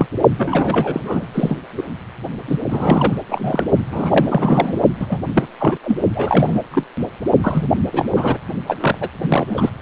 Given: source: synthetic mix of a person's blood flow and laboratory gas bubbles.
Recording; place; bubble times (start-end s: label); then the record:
Doppler ultrasound of blood flow; precordium
0.00-0.07 s: bubbles
0.38-1.26 s: bubbles
1.33-1.56 s: bubbles
1.76-1.83 s: bubbles
2.47-2.57 s: bubbles
2.69-3.18 s: bubbles
3.29-3.64 s: bubbles
3.91-4.80 s: bubbles
5.00-5.21 s: bubbles
5.33-5.47 s: bubbles
5.60-5.76 s: bubbles
5.83-5.98 s: bubbles
6.15-6.62 s: bubbles
6.71-6.83 s: bubbles
7.43-7.67 s: bubbles
7.92-8.08 s: bubbles
8.15-8.38 s: bubbles
8.67-8.75 s: bubbles
8.80-8.98 s: bubbles
9.00-9.09 s: bubbles
9.22-9.70 s: bubbles
From the record:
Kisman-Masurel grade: 343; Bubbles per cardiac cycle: rolling drumbeat, 9 or more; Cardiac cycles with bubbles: 100%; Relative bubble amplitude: loud (0.450 to 0.775); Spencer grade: 3 (all of the cardiac periods contain showers or single bubble signals, but not dominating or overriding the cardiac motion signals); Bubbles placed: only in the low amplitude regions of the cardiac cycle